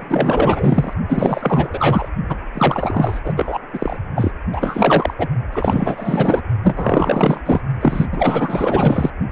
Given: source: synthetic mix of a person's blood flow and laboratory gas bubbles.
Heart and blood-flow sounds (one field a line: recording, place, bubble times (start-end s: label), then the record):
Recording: Doppler ultrasound of blood flow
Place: precordium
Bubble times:
0.00-0.93 s: bubbles
1.08-2.08 s: bubbles
2.29-2.36 s: bubbles
2.54-3.20 s: bubbles
3.24-3.34 s: bubbles
3.37-3.59 s: bubbles
3.72-3.96 s: bubbles
4.15-4.33 s: bubbles
4.52-5.14 s: bubbles
5.18-5.27 s: bubbles
5.52-6.42 s: bubbles
6.62-7.41 s: bubbles
7.46-7.61 s: bubbles
7.81-8.07 s: bubbles
8.12-9.10 s: bubbles
From the record:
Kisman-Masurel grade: 444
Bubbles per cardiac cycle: continuous sound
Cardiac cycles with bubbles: 100%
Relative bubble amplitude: maximal (0.775 to 0.999)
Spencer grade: 4 (maximum detectable bubble signal sounding continuously throughout systole and diastole of every cardiac period, and overriding the amplitude of the normal cardiac signals)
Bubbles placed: only in the low amplitude regions of the cardiac cycle